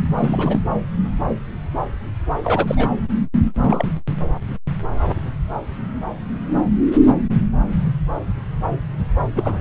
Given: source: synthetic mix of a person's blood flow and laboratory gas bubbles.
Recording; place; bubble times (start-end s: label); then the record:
Doppler ultrasound of blood flow; subclavian vein
0.17-0.60 s: bubbles
2.44-2.89 s: bubbles
3.54-3.94 s: bubbles
9.35-9.61 s: bubbles
From the record:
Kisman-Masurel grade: 222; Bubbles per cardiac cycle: several, 3 to 8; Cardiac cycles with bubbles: 10 to 50%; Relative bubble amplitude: moderate (0.250 to 0.450); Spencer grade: 2 (many but less than half of the cardiac periods contain bubble signals, singularly or in groups); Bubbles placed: anywhere in the cardiac cycle